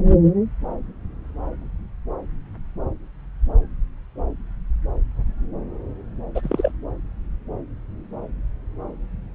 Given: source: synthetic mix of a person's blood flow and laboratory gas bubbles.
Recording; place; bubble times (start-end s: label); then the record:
Doppler ultrasound of blood flow; subclavian vein
6.34-6.71 s: bubbles
From the record:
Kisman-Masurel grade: 212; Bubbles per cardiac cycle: several, 3 to 8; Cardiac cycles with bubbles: 1 to 10%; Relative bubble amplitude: moderate (0.250 to 0.450); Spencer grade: 1 (occasional bubble signal discernible with the cardiac motion signal, with majority of cardiac periods free of bubbles); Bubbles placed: anywhere in the cardiac cycle